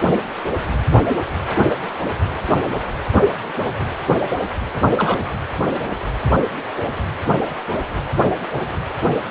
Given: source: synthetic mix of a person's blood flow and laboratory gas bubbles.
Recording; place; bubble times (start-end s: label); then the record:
Doppler ultrasound of blood flow; precordium
4.97-5.19 s: bubbles
From the record:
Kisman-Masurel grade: 122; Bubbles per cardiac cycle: 1 to 2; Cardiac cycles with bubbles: 10 to 50%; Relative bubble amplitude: moderate (0.250 to 0.450); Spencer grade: 2 (many but less than half of the cardiac periods contain bubble signals, singularly or in groups); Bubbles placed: anywhere in the cardiac cycle